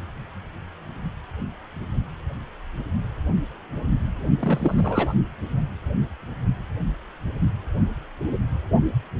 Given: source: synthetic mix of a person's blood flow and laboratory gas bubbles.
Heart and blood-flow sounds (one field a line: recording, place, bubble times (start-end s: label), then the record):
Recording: Doppler ultrasound of blood flow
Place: precordium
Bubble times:
4.39-5.13 s: bubbles
From the record:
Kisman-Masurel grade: 212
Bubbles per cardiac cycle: several, 3 to 8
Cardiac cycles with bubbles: 1 to 10%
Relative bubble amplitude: moderate (0.250 to 0.450)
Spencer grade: 1 (occasional bubble signal discernible with the cardiac motion signal, with majority of cardiac periods free of bubbles)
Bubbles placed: only in the low amplitude regions of the cardiac cycle